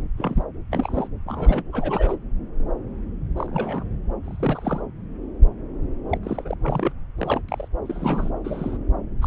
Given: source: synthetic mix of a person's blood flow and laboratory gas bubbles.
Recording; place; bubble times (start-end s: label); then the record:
Doppler ultrasound of blood flow; subclavian vein
0.17-0.43 s: bubbles
0.72-1.07 s: bubbles
1.26-1.64 s: bubbles
1.72-2.17 s: bubbles
3.36-3.84 s: bubbles
4.25-4.81 s: bubbles
6.09-6.18 s: bubbles
6.23-6.54 s: bubbles
6.64-6.92 s: bubbles
7.18-7.41 s: bubbles
7.48-7.68 s: bubbles
7.85-8.32 s: bubbles
8.44-8.78 s: bubbles
9.21-9.27 s: bubbles
From the record:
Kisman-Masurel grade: 232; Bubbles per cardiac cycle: several, 3 to 8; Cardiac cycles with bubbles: 50 to 99%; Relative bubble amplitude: moderate (0.250 to 0.450); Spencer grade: 3 (all of the cardiac periods contain showers or single bubble signals, but not dominating or overriding the cardiac motion signals); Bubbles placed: anywhere in the cardiac cycle